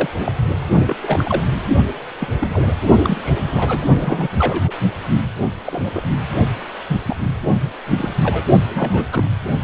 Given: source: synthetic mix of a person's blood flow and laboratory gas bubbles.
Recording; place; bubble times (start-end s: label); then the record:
Doppler ultrasound of blood flow; precordium
0.00-0.09 s: bubbles
0.20-0.32 s: bubbles
0.86-0.96 s: bubbles
1.03-1.44 s: bubbles
2.19-2.29 s: bubbles
2.39-2.74 s: bubbles
3.04-3.18 s: bubbles
3.24-3.85 s: bubbles
3.99-4.28 s: bubbles
4.38-4.71 s: bubbles
5.64-6.03 s: bubbles
6.17-6.29 s: bubbles
6.88-6.96 s: bubbles
7.05-7.16 s: bubbles
7.80-8.43 s: bubbles
8.70-9.08 s: bubbles
9.12-9.29 s: bubbles
From the record:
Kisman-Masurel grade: 242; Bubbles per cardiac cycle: several, 3 to 8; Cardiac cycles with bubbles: 100%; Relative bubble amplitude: moderate (0.250 to 0.450); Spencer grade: 3 (all of the cardiac periods contain showers or single bubble signals, but not dominating or overriding the cardiac motion signals); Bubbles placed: only in the low amplitude regions of the cardiac cycle